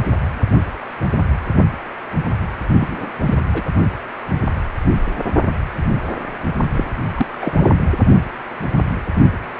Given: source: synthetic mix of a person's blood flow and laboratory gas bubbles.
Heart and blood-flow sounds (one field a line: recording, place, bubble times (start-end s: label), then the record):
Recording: Doppler ultrasound of blood flow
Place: precordium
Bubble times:
2.80-3.12 s: bubbles
3.25-3.34 s: bubbles
3.53-3.62 s: bubbles
6.72-6.84 s: bubbles
7.16-7.27 s: bubbles
7.32-7.70 s: bubbles
From the record:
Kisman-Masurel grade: 222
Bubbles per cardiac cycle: several, 3 to 8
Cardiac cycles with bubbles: 10 to 50%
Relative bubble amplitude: moderate (0.250 to 0.450)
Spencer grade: 2 (many but less than half of the cardiac periods contain bubble signals, singularly or in groups)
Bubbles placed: only in the low amplitude regions of the cardiac cycle